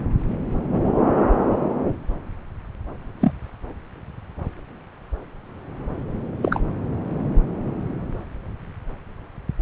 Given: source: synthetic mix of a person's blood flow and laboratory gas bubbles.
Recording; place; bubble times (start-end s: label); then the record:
Doppler ultrasound of blood flow; subclavian vein
0.70-0.82 s: bubbles
3.21-3.32 s: bubbles
6.42-6.60 s: bubbles
From the record:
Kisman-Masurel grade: 123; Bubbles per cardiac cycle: 1 to 2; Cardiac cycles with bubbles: 10 to 50%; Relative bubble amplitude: loud (0.450 to 0.775); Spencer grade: 2 (many but less than half of the cardiac periods contain bubble signals, singularly or in groups); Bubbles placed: anywhere in the cardiac cycle